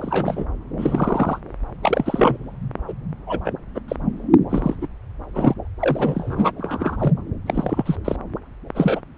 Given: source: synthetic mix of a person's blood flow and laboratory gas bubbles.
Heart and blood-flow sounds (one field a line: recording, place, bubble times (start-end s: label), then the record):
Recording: Doppler ultrasound of blood flow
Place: subclavian vein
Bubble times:
0.00-0.46 s: bubbles
0.78-1.39 s: bubbles
1.82-2.38 s: bubbles
2.88-2.94 s: bubbles
3.27-3.40 s: bubbles
3.45-3.52 s: bubbles
3.74-3.81 s: bubbles
3.88-3.96 s: bubbles
4.50-4.76 s: bubbles
4.82-4.88 s: bubbles
5.35-5.54 s: bubbles
5.79-6.52 s: bubbles
6.58-7.13 s: bubbles
7.46-7.96 s: bubbles
8.04-8.16 s: bubbles
8.75-9.01 s: bubbles
From the record:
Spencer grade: 3 (all of the cardiac periods contain showers or single bubble signals, but not dominating or overriding the cardiac motion signals)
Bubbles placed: anywhere in the cardiac cycle